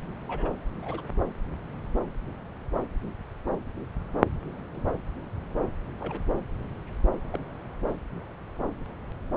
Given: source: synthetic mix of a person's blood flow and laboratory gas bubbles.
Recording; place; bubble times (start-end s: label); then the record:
Doppler ultrasound of blood flow; subclavian vein
0.28-0.54 s: bubbles
0.82-1.01 s: bubbles
4.74-4.82 s: bubbles
5.99-6.21 s: bubbles
7.33-7.38 s: bubbles
From the record:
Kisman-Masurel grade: 121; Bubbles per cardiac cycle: 1 to 2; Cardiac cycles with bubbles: 10 to 50%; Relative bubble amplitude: barely perceptible (0.100 to 0.250); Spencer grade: 2 (many but less than half of the cardiac periods contain bubble signals, singularly or in groups); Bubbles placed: anywhere in the cardiac cycle